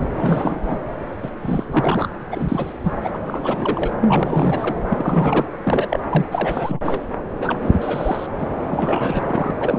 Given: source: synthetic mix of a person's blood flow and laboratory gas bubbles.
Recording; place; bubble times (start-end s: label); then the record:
Doppler ultrasound of blood flow; subclavian vein
0.00-0.04 s: bubbles
0.18-0.60 s: bubbles
0.63-0.79 s: bubbles
1.23-1.30 s: bubbles
1.42-1.65 s: bubbles
1.72-2.08 s: bubbles
2.31-2.73 s: bubbles
2.84-2.92 s: bubbles
3.00-3.10 s: bubbles
3.13-3.19 s: bubbles
3.27-3.92 s: bubbles
4.01-4.75 s: bubbles
4.89-5.49 s: bubbles
5.63-5.99 s: bubbles
6.09-6.26 s: bubbles
6.31-6.79 s: bubbles
6.84-7.01 s: bubbles
7.40-7.57 s: bubbles
7.62-8.26 s: bubbles
8.38-8.48 s: bubbles
8.70-9.53 s: bubbles
9.60-9.79 s: bubbles
From the record:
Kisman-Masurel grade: 343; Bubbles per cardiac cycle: rolling drumbeat, 9 or more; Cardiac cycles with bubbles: 100%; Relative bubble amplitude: loud (0.450 to 0.775); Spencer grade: 3 (all of the cardiac periods contain showers or single bubble signals, but not dominating or overriding the cardiac motion signals); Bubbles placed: anywhere in the cardiac cycle